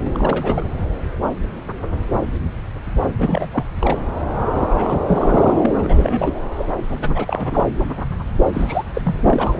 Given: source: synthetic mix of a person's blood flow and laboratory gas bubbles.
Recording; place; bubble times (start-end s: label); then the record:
Doppler ultrasound of blood flow; subclavian vein
0.04-0.10 s: bubbles
0.15-0.66 s: bubbles
3.18-3.48 s: bubbles
3.52-3.64 s: bubbles
3.81-3.97 s: bubbles
4.53-5.01 s: bubbles
5.08-5.71 s: bubbles
5.78-6.35 s: bubbles
6.57-6.65 s: bubbles
6.89-6.99 s: bubbles
7.02-7.64 s: bubbles
8.54-8.83 s: bubbles
8.94-9.55 s: bubbles
From the record:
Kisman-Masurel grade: 332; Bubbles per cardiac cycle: rolling drumbeat, 9 or more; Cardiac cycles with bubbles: 50 to 99%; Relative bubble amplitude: moderate (0.250 to 0.450); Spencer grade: 3 (all of the cardiac periods contain showers or single bubble signals, but not dominating or overriding the cardiac motion signals); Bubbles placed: anywhere in the cardiac cycle